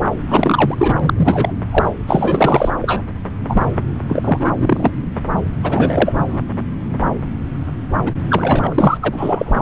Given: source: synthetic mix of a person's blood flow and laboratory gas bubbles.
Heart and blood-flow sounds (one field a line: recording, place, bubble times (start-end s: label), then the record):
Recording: Doppler ultrasound of blood flow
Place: subclavian vein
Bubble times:
0.28-0.95 s: bubbles
1.00-1.14 s: bubbles
1.16-1.53 s: bubbles
1.72-1.86 s: bubbles
2.07-2.71 s: bubbles
2.81-3.02 s: bubbles
3.48-3.69 s: bubbles
4.08-4.53 s: bubbles
4.55-4.91 s: bubbles
5.62-6.39 s: bubbles
8.06-8.12 s: bubbles
8.29-8.98 s: bubbles
9.02-9.62 s: bubbles
From the record:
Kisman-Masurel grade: 333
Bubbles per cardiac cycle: rolling drumbeat, 9 or more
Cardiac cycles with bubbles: 50 to 99%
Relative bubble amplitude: loud (0.450 to 0.775)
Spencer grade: 3 (all of the cardiac periods contain showers or single bubble signals, but not dominating or overriding the cardiac motion signals)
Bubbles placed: anywhere in the cardiac cycle